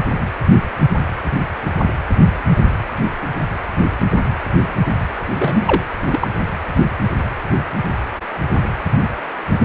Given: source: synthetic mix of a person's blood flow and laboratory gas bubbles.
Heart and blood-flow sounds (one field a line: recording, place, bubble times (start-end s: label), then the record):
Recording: Doppler ultrasound of blood flow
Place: precordium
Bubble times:
5.38-5.83 s: bubbles
6.12-6.28 s: bubbles
From the record:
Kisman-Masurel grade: 213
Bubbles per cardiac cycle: several, 3 to 8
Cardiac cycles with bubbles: 1 to 10%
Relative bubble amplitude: loud (0.450 to 0.775)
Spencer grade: 1 (occasional bubble signal discernible with the cardiac motion signal, with majority of cardiac periods free of bubbles)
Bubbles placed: anywhere in the cardiac cycle